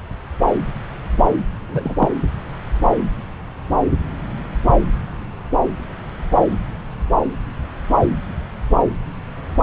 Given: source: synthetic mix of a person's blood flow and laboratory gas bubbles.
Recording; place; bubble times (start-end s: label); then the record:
Doppler ultrasound of blood flow; subclavian vein
1.68-2.10 s: bubbles
From the record:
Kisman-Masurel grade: 112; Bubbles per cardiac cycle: 1 to 2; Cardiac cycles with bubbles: 1 to 10%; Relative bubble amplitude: moderate (0.250 to 0.450); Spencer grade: 1 (occasional bubble signal discernible with the cardiac motion signal, with majority of cardiac periods free of bubbles); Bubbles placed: anywhere in the cardiac cycle